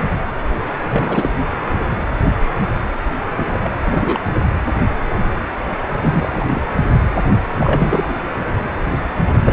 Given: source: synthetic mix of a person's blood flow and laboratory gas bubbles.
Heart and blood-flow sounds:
Doppler ultrasound of blood flow; precordium
0.89-1.33 s: bubbles
3.36-3.70 s: bubbles
3.85-4.20 s: bubbles
6.01-6.62 s: bubbles
7.59-8.14 s: bubbles
9.27-9.31 s: bubbles
9.45-9.53 s: bubbles
From the record:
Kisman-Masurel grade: 232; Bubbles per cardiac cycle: several, 3 to 8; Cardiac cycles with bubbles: 50 to 99%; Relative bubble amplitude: moderate (0.250 to 0.450); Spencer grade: 3 (all of the cardiac periods contain showers or single bubble signals, but not dominating or overriding the cardiac motion signals); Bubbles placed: anywhere in the cardiac cycle

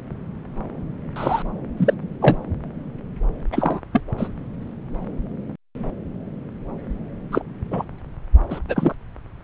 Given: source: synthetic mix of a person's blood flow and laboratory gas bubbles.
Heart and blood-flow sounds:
Doppler ultrasound of blood flow; subclavian vein
1.16-1.43 s: bubbles
1.76-1.94 s: bubbles
2.21-2.37 s: bubbles
3.52-3.80 s: bubbles
3.92-4.01 s: bubbles
4.18-4.29 s: bubbles
7.32-7.42 s: bubbles
7.71-7.85 s: bubbles
8.50-8.59 s: bubbles
8.68-8.95 s: bubbles
From the record:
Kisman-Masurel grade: 222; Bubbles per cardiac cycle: several, 3 to 8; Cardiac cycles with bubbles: 10 to 50%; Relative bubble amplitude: moderate (0.250 to 0.450); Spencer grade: 2 (many but less than half of the cardiac periods contain bubble signals, singularly or in groups); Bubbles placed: anywhere in the cardiac cycle

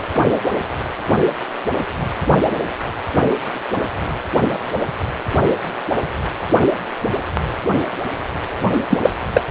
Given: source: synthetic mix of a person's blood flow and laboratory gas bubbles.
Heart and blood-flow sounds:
Doppler ultrasound of blood flow; precordium
8.90-9.00 s: bubbles
9.02-9.10 s: bubbles
9.32-9.41 s: bubbles
From the record:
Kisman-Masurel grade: 223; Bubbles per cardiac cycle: several, 3 to 8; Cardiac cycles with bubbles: 10 to 50%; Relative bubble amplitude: loud (0.450 to 0.775); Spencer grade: 2 (many but less than half of the cardiac periods contain bubble signals, singularly or in groups); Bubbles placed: only in the low amplitude regions of the cardiac cycle

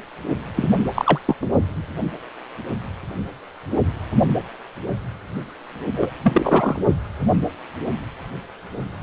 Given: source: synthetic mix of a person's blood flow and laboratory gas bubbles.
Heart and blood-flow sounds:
Doppler ultrasound of blood flow; precordium
0.56-0.86 s: bubbles
0.95-1.20 s: bubbles
1.26-1.35 s: bubbles
1.42-1.46 s: bubbles
5.96-6.11 s: bubbles
6.23-6.82 s: bubbles
From the record:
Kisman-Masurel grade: 222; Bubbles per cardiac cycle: several, 3 to 8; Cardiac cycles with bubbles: 10 to 50%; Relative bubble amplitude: moderate (0.250 to 0.450); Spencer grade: 2 (many but less than half of the cardiac periods contain bubble signals, singularly or in groups); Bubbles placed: only in the low amplitude regions of the cardiac cycle

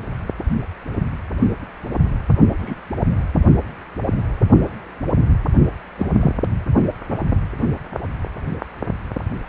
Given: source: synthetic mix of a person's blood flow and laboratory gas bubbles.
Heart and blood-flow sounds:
Doppler ultrasound of blood flow; precordium
2.58-2.80 s: bubbles
5.96-6.07 s: bubbles
6.21-6.32 s: bubbles
From the record:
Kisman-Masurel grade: 122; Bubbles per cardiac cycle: 1 to 2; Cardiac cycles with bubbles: 10 to 50%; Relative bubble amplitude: moderate (0.250 to 0.450); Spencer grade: 2 (many but less than half of the cardiac periods contain bubble signals, singularly or in groups); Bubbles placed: anywhere in the cardiac cycle

